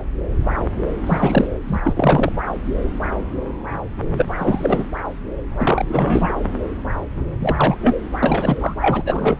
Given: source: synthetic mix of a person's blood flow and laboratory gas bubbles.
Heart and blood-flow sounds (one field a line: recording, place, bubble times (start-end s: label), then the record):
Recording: Doppler ultrasound of blood flow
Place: subclavian vein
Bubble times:
1.06-1.48 s: bubbles
1.67-1.80 s: bubbles
1.85-2.32 s: bubbles
4.17-4.25 s: bubbles
4.38-4.84 s: bubbles
5.57-6.33 s: bubbles
7.40-7.75 s: bubbles
7.81-8.01 s: bubbles
8.23-8.57 s: bubbles
8.60-8.74 s: bubbles
8.82-9.03 s: bubbles
9.05-9.36 s: bubbles
From the record:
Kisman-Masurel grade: 332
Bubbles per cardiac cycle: rolling drumbeat, 9 or more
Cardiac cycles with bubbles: 50 to 99%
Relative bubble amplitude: moderate (0.250 to 0.450)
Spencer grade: 3 (all of the cardiac periods contain showers or single bubble signals, but not dominating or overriding the cardiac motion signals)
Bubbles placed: anywhere in the cardiac cycle